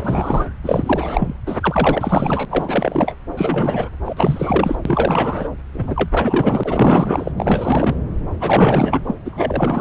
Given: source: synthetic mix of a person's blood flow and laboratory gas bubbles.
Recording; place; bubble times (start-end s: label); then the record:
Doppler ultrasound of blood flow; subclavian vein
0.00-0.47 s: bubbles
0.64-1.34 s: bubbles
1.46-2.45 s: bubbles
2.50-3.14 s: bubbles
3.37-3.90 s: bubbles
4.05-4.82 s: bubbles
4.85-5.48 s: bubbles
5.73-7.31 s: bubbles
7.37-7.95 s: bubbles
8.41-9.15 s: bubbles
9.25-9.81 s: bubbles
From the record:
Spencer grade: 4 (maximum detectable bubble signal sounding continuously throughout systole and diastole of every cardiac period, and overriding the amplitude of the normal cardiac signals); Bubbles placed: anywhere in the cardiac cycle